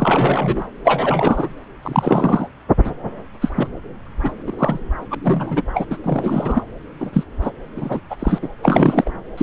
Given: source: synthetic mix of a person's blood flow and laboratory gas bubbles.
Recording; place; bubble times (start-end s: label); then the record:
Doppler ultrasound of blood flow; subclavian vein
0.00-0.66 s: bubbles
0.84-1.54 s: bubbles
1.83-2.48 s: bubbles
2.83-2.91 s: bubbles
3.41-3.52 s: bubbles
3.56-3.68 s: bubbles
4.23-4.31 s: bubbles
4.46-4.52 s: bubbles
4.58-4.79 s: bubbles
5.10-5.15 s: bubbles
5.24-5.61 s: bubbles
5.74-5.86 s: bubbles
5.90-5.97 s: bubbles
6.03-6.63 s: bubbles
7.00-7.23 s: bubbles
7.42-7.50 s: bubbles
7.76-8.00 s: bubbles
8.10-8.16 s: bubbles
8.19-8.38 s: bubbles
8.42-8.50 s: bubbles
8.62-9.10 s: bubbles
9.37-9.43 s: bubbles
From the record:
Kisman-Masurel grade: 243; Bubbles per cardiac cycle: several, 3 to 8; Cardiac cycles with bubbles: 100%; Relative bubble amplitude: loud (0.450 to 0.775); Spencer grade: 3 (all of the cardiac periods contain showers or single bubble signals, but not dominating or overriding the cardiac motion signals); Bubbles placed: anywhere in the cardiac cycle